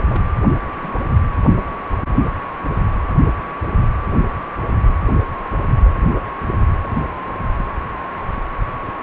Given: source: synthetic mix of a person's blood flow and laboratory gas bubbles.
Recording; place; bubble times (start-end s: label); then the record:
Doppler ultrasound of blood flow; precordium
0.08-0.23 s: bubbles
0.75-1.08 s: bubbles
1.61-1.68 s: bubbles
5.82-5.91 s: bubbles
From the record:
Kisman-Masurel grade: 121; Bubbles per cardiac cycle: 1 to 2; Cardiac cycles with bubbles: 10 to 50%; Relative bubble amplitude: barely perceptible (0.100 to 0.250); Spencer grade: 2 (many but less than half of the cardiac periods contain bubble signals, singularly or in groups); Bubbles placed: anywhere in the cardiac cycle